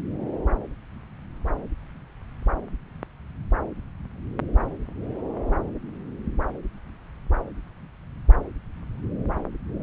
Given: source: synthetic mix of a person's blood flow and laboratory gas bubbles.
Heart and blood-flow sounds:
Doppler ultrasound of blood flow; subclavian vein
no bubbles
From the record:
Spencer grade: 0 (complete lack of bubble signals)

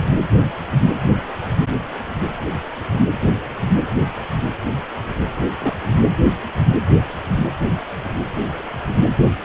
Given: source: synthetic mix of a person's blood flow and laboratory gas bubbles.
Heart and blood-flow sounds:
Doppler ultrasound of blood flow; precordium
5.59-5.75 s: bubbles
From the record:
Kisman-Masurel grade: 111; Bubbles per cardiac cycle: 1 to 2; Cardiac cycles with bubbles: 1 to 10%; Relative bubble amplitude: barely perceptible (0.100 to 0.250); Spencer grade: 1 (occasional bubble signal discernible with the cardiac motion signal, with majority of cardiac periods free of bubbles); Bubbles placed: anywhere in the cardiac cycle

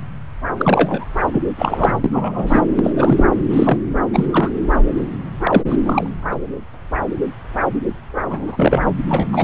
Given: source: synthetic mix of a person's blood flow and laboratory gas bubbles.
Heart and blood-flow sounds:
Doppler ultrasound of blood flow; subclavian vein
0.57-1.05 s: bubbles
1.34-1.41 s: bubbles
1.56-1.99 s: bubbles
2.04-2.61 s: bubbles
2.75-2.93 s: bubbles
2.96-3.24 s: bubbles
3.49-3.78 s: bubbles
4.12-4.50 s: bubbles
5.43-5.62 s: bubbles
5.68-5.76 s: bubbles
5.85-6.07 s: bubbles
6.31-6.35 s: bubbles
8.29-8.83 s: bubbles
8.86-8.91 s: bubbles
9.09-9.27 s: bubbles
9.32-9.44 s: bubbles
From the record:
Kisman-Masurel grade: 233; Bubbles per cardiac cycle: several, 3 to 8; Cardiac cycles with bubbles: 50 to 99%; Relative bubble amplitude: loud (0.450 to 0.775); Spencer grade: 3 (all of the cardiac periods contain showers or single bubble signals, but not dominating or overriding the cardiac motion signals); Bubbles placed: anywhere in the cardiac cycle

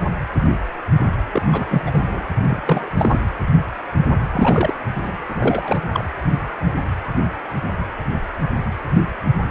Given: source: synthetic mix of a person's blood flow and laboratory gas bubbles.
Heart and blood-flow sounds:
Doppler ultrasound of blood flow; precordium
1.32-1.42 s: bubbles
1.52-1.81 s: bubbles
1.86-2.02 s: bubbles
2.12-2.24 s: bubbles
2.38-2.62 s: bubbles
2.66-2.90 s: bubbles
2.98-3.20 s: bubbles
4.32-4.75 s: bubbles
5.03-5.12 s: bubbles
5.29-5.82 s: bubbles
5.93-6.04 s: bubbles
From the record:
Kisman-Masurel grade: 332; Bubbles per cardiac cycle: rolling drumbeat, 9 or more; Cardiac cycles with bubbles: 50 to 99%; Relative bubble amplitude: moderate (0.250 to 0.450); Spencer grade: 3 (all of the cardiac periods contain showers or single bubble signals, but not dominating or overriding the cardiac motion signals); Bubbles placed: anywhere in the cardiac cycle

